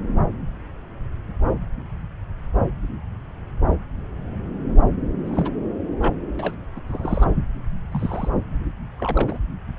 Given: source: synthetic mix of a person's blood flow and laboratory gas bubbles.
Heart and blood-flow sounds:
Doppler ultrasound of blood flow; subclavian vein
5.25-5.50 s: bubbles
6.00-6.17 s: bubbles
6.39-6.54 s: bubbles
6.76-6.80 s: bubbles
6.88-7.26 s: bubbles
7.91-8.29 s: bubbles
8.97-9.38 s: bubbles
From the record:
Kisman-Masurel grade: 221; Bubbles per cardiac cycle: several, 3 to 8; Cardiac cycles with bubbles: 10 to 50%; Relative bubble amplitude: barely perceptible (0.100 to 0.250); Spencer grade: 2 (many but less than half of the cardiac periods contain bubble signals, singularly or in groups); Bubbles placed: anywhere in the cardiac cycle

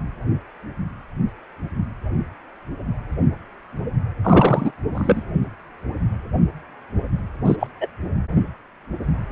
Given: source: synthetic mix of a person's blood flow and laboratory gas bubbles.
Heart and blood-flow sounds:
Doppler ultrasound of blood flow; precordium
4.24-4.71 s: bubbles
4.94-5.23 s: bubbles
7.45-7.56 s: bubbles
7.60-7.68 s: bubbles
7.80-7.87 s: bubbles
From the record:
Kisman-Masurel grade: 223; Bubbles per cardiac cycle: several, 3 to 8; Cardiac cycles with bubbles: 10 to 50%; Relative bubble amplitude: loud (0.450 to 0.775); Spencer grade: 2 (many but less than half of the cardiac periods contain bubble signals, singularly or in groups); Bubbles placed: anywhere in the cardiac cycle

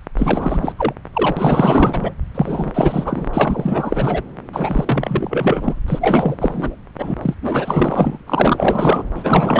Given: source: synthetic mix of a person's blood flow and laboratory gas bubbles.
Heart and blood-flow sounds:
Doppler ultrasound of blood flow; subclavian vein
0.17-0.72 s: bubbles
0.77-0.93 s: bubbles
1.13-2.14 s: bubbles
2.34-2.71 s: bubbles
2.74-3.29 s: bubbles
3.33-4.22 s: bubbles
4.53-5.81 s: bubbles
5.88-6.76 s: bubbles
6.99-7.15 s: bubbles
7.22-7.35 s: bubbles
7.42-8.18 s: bubbles
8.27-9.04 s: bubbles
9.16-9.60 s: bubbles
From the record:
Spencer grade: 4 (maximum detectable bubble signal sounding continuously throughout systole and diastole of every cardiac period, and overriding the amplitude of the normal cardiac signals); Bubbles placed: anywhere in the cardiac cycle

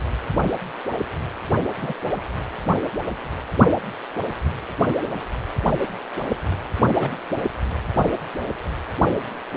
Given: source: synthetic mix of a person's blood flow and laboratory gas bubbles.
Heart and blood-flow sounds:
Doppler ultrasound of blood flow; precordium
1.81-1.93 s: bubbles
7.00-7.09 s: bubbles
From the record:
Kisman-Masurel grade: 122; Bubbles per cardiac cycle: 1 to 2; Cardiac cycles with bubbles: 10 to 50%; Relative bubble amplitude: moderate (0.250 to 0.450); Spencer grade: 2 (many but less than half of the cardiac periods contain bubble signals, singularly or in groups); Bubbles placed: anywhere in the cardiac cycle

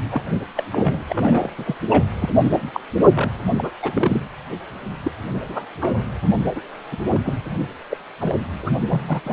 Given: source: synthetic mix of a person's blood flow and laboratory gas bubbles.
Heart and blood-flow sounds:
Doppler ultrasound of blood flow; precordium
0.10-0.22 s: bubbles
0.56-0.63 s: bubbles
0.72-1.04 s: bubbles
1.09-1.50 s: bubbles
1.58-1.76 s: bubbles
1.89-2.04 s: bubbles
2.19-2.29 s: bubbles
2.41-2.71 s: bubbles
2.73-2.80 s: bubbles
3.15-3.30 s: bubbles
3.56-3.71 s: bubbles
3.82-4.22 s: bubbles
5.04-5.11 s: bubbles
5.49-5.66 s: bubbles
5.81-6.06 s: bubbles
6.55-6.61 s: bubbles
6.92-6.96 s: bubbles
7.12-7.20 s: bubbles
7.25-7.33 s: bubbles
7.90-7.98 s: bubbles
8.21-8.35 s: bubbles
8.62-8.71 s: bubbles
8.89-9.21 s: bubbles
9.24-9.33 s: bubbles
From the record:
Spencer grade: 3 (all of the cardiac periods contain showers or single bubble signals, but not dominating or overriding the cardiac motion signals); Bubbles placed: anywhere in the cardiac cycle

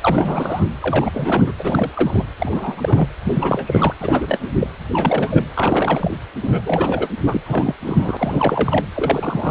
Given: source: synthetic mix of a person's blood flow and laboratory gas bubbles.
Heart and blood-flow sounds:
Doppler ultrasound of blood flow; precordium
0.01-0.65 s: bubbles
0.80-1.51 s: bubbles
1.59-2.24 s: bubbles
2.38-3.08 s: bubbles
3.25-3.94 s: bubbles
3.99-4.51 s: bubbles
4.60-4.67 s: bubbles
4.89-5.46 s: bubbles
5.56-6.17 s: bubbles
6.42-7.08 s: bubbles
7.26-7.41 s: bubbles
7.45-7.75 s: bubbles
7.81-8.85 s: bubbles
8.95-9.51 s: bubbles
From the record:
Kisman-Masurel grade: 343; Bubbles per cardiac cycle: rolling drumbeat, 9 or more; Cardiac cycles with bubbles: 100%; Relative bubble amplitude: loud (0.450 to 0.775); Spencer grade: 3 (all of the cardiac periods contain showers or single bubble signals, but not dominating or overriding the cardiac motion signals); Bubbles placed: anywhere in the cardiac cycle

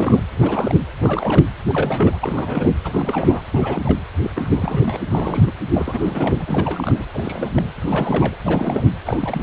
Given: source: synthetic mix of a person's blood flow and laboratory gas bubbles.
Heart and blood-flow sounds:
Doppler ultrasound of blood flow; precordium
0.00-0.23 s: bubbles
0.32-0.75 s: bubbles
1.00-1.48 s: bubbles
1.68-2.18 s: bubbles
2.21-2.73 s: bubbles
2.84-3.42 s: bubbles
3.50-3.97 s: bubbles
4.23-4.31 s: bubbles
4.35-5.01 s: bubbles
5.10-5.52 s: bubbles
5.74-7.06 s: bubbles
7.13-7.70 s: bubbles
7.75-8.37 s: bubbles
8.43-8.90 s: bubbles
9.05-9.42 s: bubbles
From the record:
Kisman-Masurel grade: 342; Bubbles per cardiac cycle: rolling drumbeat, 9 or more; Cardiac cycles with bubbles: 100%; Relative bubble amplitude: moderate (0.250 to 0.450); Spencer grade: 3 (all of the cardiac periods contain showers or single bubble signals, but not dominating or overriding the cardiac motion signals); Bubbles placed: anywhere in the cardiac cycle

